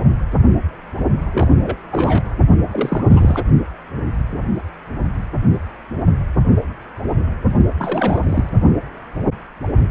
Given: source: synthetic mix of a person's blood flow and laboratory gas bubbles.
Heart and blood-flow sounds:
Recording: Doppler ultrasound of blood flow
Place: precordium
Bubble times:
1.32-1.77 s: bubbles
1.91-2.24 s: bubbles
2.71-3.43 s: bubbles
7.78-8.49 s: bubbles
From the record:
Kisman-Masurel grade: 332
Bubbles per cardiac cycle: rolling drumbeat, 9 or more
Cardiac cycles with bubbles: 50 to 99%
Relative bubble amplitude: moderate (0.250 to 0.450)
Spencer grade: 3 (all of the cardiac periods contain showers or single bubble signals, but not dominating or overriding the cardiac motion signals)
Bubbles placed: only in the low amplitude regions of the cardiac cycle

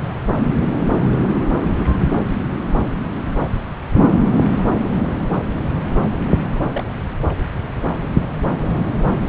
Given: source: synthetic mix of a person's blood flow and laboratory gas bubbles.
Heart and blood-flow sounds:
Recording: Doppler ultrasound of blood flow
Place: subclavian vein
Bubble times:
6.71-6.84 s: bubbles
6.86-6.89 s: bubbles
From the record:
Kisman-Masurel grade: 111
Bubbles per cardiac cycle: 1 to 2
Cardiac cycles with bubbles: 1 to 10%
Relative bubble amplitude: barely perceptible (0.100 to 0.250)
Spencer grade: 1 (occasional bubble signal discernible with the cardiac motion signal, with majority of cardiac periods free of bubbles)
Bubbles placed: anywhere in the cardiac cycle

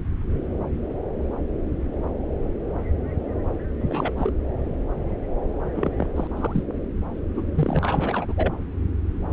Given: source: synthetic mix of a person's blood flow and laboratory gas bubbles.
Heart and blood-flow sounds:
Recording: Doppler ultrasound of blood flow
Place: subclavian vein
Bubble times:
3.80-4.12 s: bubbles
4.17-4.32 s: bubbles
5.75-5.95 s: bubbles
5.98-6.07 s: bubbles
6.16-6.28 s: bubbles
6.36-6.63 s: bubbles
7.34-7.43 s: bubbles
7.54-7.79 s: bubbles
7.82-8.33 s: bubbles
8.37-8.55 s: bubbles
From the record:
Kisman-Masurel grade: 221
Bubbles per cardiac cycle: several, 3 to 8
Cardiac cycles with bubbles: 10 to 50%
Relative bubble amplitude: barely perceptible (0.100 to 0.250)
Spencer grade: 2 (many but less than half of the cardiac periods contain bubble signals, singularly or in groups)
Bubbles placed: anywhere in the cardiac cycle

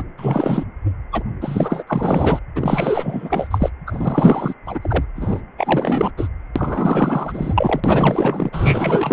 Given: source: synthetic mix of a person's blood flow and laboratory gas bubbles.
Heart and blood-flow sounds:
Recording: Doppler ultrasound of blood flow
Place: precordium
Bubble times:
0.00-0.04 s: bubbles
0.17-0.65 s: bubbles
1.11-1.24 s: bubbles
1.41-1.84 s: bubbles
1.87-2.39 s: bubbles
2.55-3.47 s: bubbles
3.50-3.70 s: bubbles
3.87-4.54 s: bubbles
4.66-4.79 s: bubbles
4.82-5.04 s: bubbles
5.15-5.42 s: bubbles
5.57-6.11 s: bubbles
6.17-6.28 s: bubbles
6.56-7.81 s: bubbles
7.83-9.13 s: bubbles
From the record:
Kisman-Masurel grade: 444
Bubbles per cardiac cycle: continuous sound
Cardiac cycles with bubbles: 100%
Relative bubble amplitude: maximal (0.775 to 0.999)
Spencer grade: 4 (maximum detectable bubble signal sounding continuously throughout systole and diastole of every cardiac period, and overriding the amplitude of the normal cardiac signals)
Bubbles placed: anywhere in the cardiac cycle

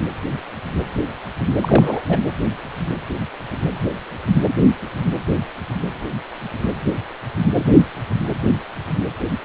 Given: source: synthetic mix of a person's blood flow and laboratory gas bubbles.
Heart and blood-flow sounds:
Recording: Doppler ultrasound of blood flow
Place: precordium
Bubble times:
1.60-2.00 s: bubbles
2.08-2.19 s: bubbles
From the record:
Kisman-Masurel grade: 212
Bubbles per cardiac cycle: several, 3 to 8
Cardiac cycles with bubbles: 1 to 10%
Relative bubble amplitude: moderate (0.250 to 0.450)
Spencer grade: 1 (occasional bubble signal discernible with the cardiac motion signal, with majority of cardiac periods free of bubbles)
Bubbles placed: anywhere in the cardiac cycle

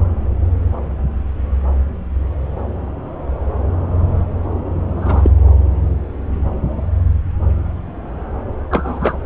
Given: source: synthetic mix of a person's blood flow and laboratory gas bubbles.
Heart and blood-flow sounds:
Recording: Doppler ultrasound of blood flow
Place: subclavian vein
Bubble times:
4.96-5.30 s: bubbles
8.71-9.17 s: bubbles
From the record:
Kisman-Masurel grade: 123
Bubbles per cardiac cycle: 1 to 2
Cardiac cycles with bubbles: 10 to 50%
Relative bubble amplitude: loud (0.450 to 0.775)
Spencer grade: 2 (many but less than half of the cardiac periods contain bubble signals, singularly or in groups)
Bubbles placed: anywhere in the cardiac cycle

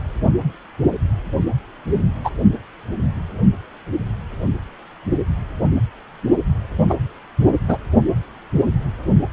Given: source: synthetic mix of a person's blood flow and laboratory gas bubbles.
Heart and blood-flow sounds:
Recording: Doppler ultrasound of blood flow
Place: precordium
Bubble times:
2.24-2.30 s: bubbles
6.89-6.94 s: bubbles
7.68-7.77 s: bubbles
From the record:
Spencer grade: 2 (many but less than half of the cardiac periods contain bubble signals, singularly or in groups)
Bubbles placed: anywhere in the cardiac cycle

